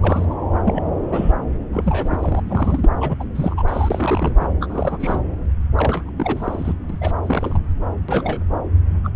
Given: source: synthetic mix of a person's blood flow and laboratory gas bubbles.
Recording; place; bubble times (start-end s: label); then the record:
Doppler ultrasound of blood flow; subclavian vein
0.02-0.25 s: bubbles
0.30-0.35 s: bubbles
0.65-0.81 s: bubbles
1.06-1.32 s: bubbles
1.72-2.88 s: bubbles
3.00-3.23 s: bubbles
3.35-3.62 s: bubbles
3.67-4.33 s: bubbles
4.39-4.50 s: bubbles
4.60-5.22 s: bubbles
5.76-6.09 s: bubbles
6.17-6.73 s: bubbles
6.89-6.97 s: bubbles
7.01-7.11 s: bubbles
7.23-7.60 s: bubbles
8.08-8.41 s: bubbles
9.04-9.10 s: bubbles
From the record:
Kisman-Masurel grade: 342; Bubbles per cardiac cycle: rolling drumbeat, 9 or more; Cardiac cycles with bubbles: 100%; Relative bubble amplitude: moderate (0.250 to 0.450); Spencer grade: 3 (all of the cardiac periods contain showers or single bubble signals, but not dominating or overriding the cardiac motion signals); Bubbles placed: anywhere in the cardiac cycle